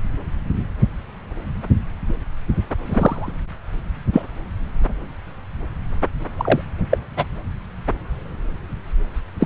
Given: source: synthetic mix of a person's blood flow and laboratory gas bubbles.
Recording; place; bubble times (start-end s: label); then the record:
Doppler ultrasound of blood flow; subclavian vein
2.85-3.33 s: bubbles
4.12-4.23 s: bubbles
6.37-6.62 s: bubbles
6.89-6.97 s: bubbles
7.17-7.25 s: bubbles
9.39-9.45 s: bubbles
From the record:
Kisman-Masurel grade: 223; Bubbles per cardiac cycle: several, 3 to 8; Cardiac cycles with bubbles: 10 to 50%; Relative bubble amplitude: loud (0.450 to 0.775); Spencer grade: 2 (many but less than half of the cardiac periods contain bubble signals, singularly or in groups); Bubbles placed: anywhere in the cardiac cycle